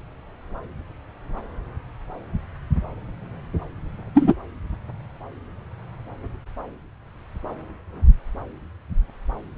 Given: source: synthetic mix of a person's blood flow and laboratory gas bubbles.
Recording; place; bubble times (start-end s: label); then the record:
Doppler ultrasound of blood flow; subclavian vein
4.14-4.34 s: bubbles
From the record:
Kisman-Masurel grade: 113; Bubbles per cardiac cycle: 1 to 2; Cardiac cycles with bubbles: 1 to 10%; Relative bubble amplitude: loud (0.450 to 0.775); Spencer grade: 1 (occasional bubble signal discernible with the cardiac motion signal, with majority of cardiac periods free of bubbles); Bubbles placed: anywhere in the cardiac cycle